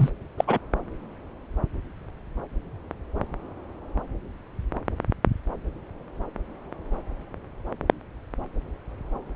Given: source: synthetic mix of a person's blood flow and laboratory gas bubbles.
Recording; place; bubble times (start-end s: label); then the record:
Doppler ultrasound of blood flow; subclavian vein
0.00-0.10 s: bubbles
0.38-0.45 s: bubbles
0.47-0.58 s: bubbles
From the record:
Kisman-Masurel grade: 212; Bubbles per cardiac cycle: several, 3 to 8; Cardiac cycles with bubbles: 1 to 10%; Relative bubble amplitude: moderate (0.250 to 0.450); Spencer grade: 1 (occasional bubble signal discernible with the cardiac motion signal, with majority of cardiac periods free of bubbles); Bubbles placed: anywhere in the cardiac cycle